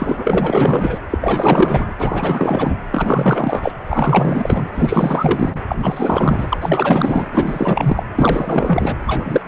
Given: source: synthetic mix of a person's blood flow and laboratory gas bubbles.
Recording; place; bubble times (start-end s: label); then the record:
Doppler ultrasound of blood flow; precordium
0.00-1.00 s: bubbles
1.10-1.18 s: bubbles
1.21-1.97 s: bubbles
2.00-2.77 s: bubbles
2.92-3.73 s: bubbles
3.86-4.67 s: bubbles
4.74-5.62 s: bubbles
5.68-6.58 s: bubbles
6.60-7.28 s: bubbles
7.32-8.04 s: bubbles
8.15-8.95 s: bubbles
9.06-9.41 s: bubbles
9.45-9.48 s: bubbles
From the record:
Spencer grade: 4 (maximum detectable bubble signal sounding continuously throughout systole and diastole of every cardiac period, and overriding the amplitude of the normal cardiac signals); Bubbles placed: anywhere in the cardiac cycle